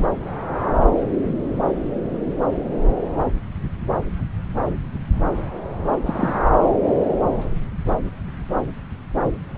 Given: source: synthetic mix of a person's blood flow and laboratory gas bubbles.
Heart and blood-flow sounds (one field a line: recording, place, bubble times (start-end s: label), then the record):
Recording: Doppler ultrasound of blood flow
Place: subclavian vein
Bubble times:
6.05-6.39 s: bubbles
From the record:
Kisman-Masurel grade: 112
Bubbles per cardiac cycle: 1 to 2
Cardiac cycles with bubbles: 1 to 10%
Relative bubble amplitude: moderate (0.250 to 0.450)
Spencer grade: 1 (occasional bubble signal discernible with the cardiac motion signal, with majority of cardiac periods free of bubbles)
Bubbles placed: anywhere in the cardiac cycle